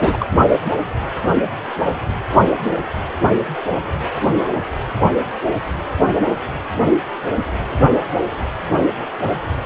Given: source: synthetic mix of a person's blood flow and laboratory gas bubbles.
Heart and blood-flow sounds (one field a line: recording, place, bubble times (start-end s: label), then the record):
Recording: Doppler ultrasound of blood flow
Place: precordium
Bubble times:
0.00-0.17 s: bubbles
0.20-0.26 s: bubbles
0.32-0.39 s: bubbles
From the record:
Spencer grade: 1 (occasional bubble signal discernible with the cardiac motion signal, with majority of cardiac periods free of bubbles)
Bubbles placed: anywhere in the cardiac cycle